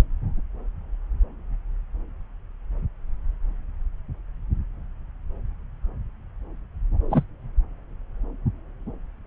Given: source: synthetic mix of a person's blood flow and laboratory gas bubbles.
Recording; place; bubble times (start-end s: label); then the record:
Doppler ultrasound of blood flow; subclavian vein
7.11-7.23 s: bubbles
From the record:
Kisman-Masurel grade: 123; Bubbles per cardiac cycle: 1 to 2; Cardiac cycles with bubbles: 10 to 50%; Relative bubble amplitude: loud (0.450 to 0.775); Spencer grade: 2 (many but less than half of the cardiac periods contain bubble signals, singularly or in groups); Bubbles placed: anywhere in the cardiac cycle